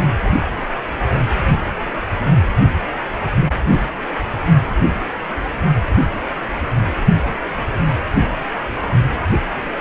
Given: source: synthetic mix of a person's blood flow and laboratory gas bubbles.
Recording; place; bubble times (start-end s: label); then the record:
Doppler ultrasound of blood flow; precordium
3.67-3.81 s: bubbles
From the record:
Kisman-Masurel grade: 113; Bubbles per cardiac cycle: 1 to 2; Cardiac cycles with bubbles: 1 to 10%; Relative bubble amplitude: loud (0.450 to 0.775); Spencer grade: 1 (occasional bubble signal discernible with the cardiac motion signal, with majority of cardiac periods free of bubbles); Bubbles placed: only in the low amplitude regions of the cardiac cycle